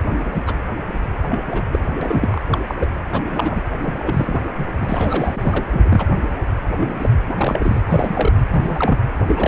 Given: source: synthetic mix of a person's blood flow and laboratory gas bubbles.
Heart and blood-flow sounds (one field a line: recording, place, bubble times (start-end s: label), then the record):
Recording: Doppler ultrasound of blood flow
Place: precordium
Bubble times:
0.11-0.25 s: bubbles
0.34-0.42 s: bubbles
0.47-0.56 s: bubbles
1.30-1.40 s: bubbles
1.51-1.63 s: bubbles
1.72-1.81 s: bubbles
2.01-2.42 s: bubbles
2.52-2.60 s: bubbles
2.67-2.75 s: bubbles
2.79-2.87 s: bubbles
3.12-3.25 s: bubbles
3.30-3.62 s: bubbles
3.83-4.40 s: bubbles
4.57-4.66 s: bubbles
4.80-5.64 s: bubbles
5.72-6.07 s: bubbles
6.75-7.13 s: bubbles
7.29-7.33 s: bubbles
7.36-7.81 s: bubbles
7.86-8.32 s: bubbles
8.49-9.00 s: bubbles
9.27-9.47 s: bubbles
From the record:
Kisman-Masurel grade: 232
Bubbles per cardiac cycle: several, 3 to 8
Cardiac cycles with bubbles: 50 to 99%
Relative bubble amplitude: moderate (0.250 to 0.450)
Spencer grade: 3 (all of the cardiac periods contain showers or single bubble signals, but not dominating or overriding the cardiac motion signals)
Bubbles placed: anywhere in the cardiac cycle